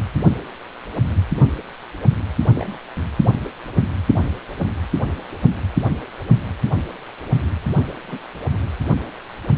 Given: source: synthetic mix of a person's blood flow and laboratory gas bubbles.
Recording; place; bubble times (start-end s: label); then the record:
Doppler ultrasound of blood flow; precordium
2.54-2.77 s: bubbles
8.08-8.17 s: bubbles
From the record:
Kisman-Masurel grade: 121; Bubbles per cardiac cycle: 1 to 2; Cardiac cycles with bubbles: 10 to 50%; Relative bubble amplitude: barely perceptible (0.100 to 0.250); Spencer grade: 2 (many but less than half of the cardiac periods contain bubble signals, singularly or in groups); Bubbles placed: anywhere in the cardiac cycle